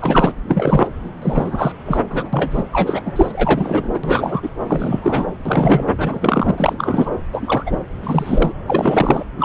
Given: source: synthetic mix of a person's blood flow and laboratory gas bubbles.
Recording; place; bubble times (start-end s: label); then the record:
Doppler ultrasound of blood flow; subclavian vein
0.00-0.32 s: bubbles
0.48-0.88 s: bubbles
1.22-1.72 s: bubbles
1.85-2.00 s: bubbles
2.10-2.29 s: bubbles
2.33-2.63 s: bubbles
2.73-3.12 s: bubbles
3.16-4.00 s: bubbles
4.03-4.49 s: bubbles
4.67-5.25 s: bubbles
5.45-5.87 s: bubbles
5.97-7.10 s: bubbles
7.32-7.63 s: bubbles
7.66-7.80 s: bubbles
8.03-8.52 s: bubbles
8.67-9.25 s: bubbles
9.38-9.44 s: bubbles
From the record:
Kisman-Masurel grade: 343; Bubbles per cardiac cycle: rolling drumbeat, 9 or more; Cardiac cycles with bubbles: 100%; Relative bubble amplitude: loud (0.450 to 0.775); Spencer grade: 3 (all of the cardiac periods contain showers or single bubble signals, but not dominating or overriding the cardiac motion signals); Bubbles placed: anywhere in the cardiac cycle